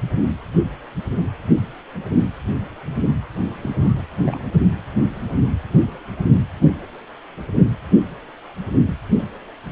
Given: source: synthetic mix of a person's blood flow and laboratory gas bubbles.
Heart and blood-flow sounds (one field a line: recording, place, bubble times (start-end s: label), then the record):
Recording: Doppler ultrasound of blood flow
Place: precordium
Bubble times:
3.61-4.05 s: bubbles
4.20-4.42 s: bubbles
From the record:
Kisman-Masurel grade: 211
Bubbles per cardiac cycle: several, 3 to 8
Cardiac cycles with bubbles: 1 to 10%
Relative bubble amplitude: barely perceptible (0.100 to 0.250)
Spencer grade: 1 (occasional bubble signal discernible with the cardiac motion signal, with majority of cardiac periods free of bubbles)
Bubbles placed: anywhere in the cardiac cycle